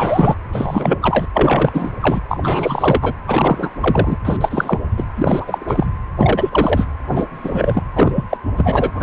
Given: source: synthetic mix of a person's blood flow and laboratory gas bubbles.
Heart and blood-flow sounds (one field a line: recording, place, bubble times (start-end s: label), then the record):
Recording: Doppler ultrasound of blood flow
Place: precordium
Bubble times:
0.00-0.34 s: bubbles
0.52-1.26 s: bubbles
1.34-1.91 s: bubbles
2.00-2.20 s: bubbles
2.28-3.13 s: bubbles
3.28-3.70 s: bubbles
3.80-4.17 s: bubbles
4.25-4.37 s: bubbles
4.41-4.79 s: bubbles
4.96-5.04 s: bubbles
5.16-5.87 s: bubbles
6.17-6.87 s: bubbles
7.08-7.27 s: bubbles
7.35-7.83 s: bubbles
7.96-8.12 s: bubbles
8.15-8.24 s: bubbles
8.29-8.38 s: bubbles
8.57-8.91 s: bubbles
8.94-9.03 s: bubbles
From the record:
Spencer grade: 3 (all of the cardiac periods contain showers or single bubble signals, but not dominating or overriding the cardiac motion signals)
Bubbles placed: anywhere in the cardiac cycle